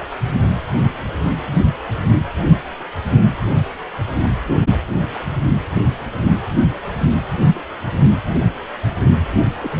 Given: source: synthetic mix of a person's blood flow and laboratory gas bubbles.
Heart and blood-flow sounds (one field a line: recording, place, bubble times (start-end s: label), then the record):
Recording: Doppler ultrasound of blood flow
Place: precordium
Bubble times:
7.53-7.60 s: bubbles
9.59-9.71 s: bubbles
From the record:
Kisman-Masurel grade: 121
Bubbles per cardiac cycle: 1 to 2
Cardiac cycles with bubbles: 10 to 50%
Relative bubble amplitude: barely perceptible (0.100 to 0.250)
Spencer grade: 2 (many but less than half of the cardiac periods contain bubble signals, singularly or in groups)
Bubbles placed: anywhere in the cardiac cycle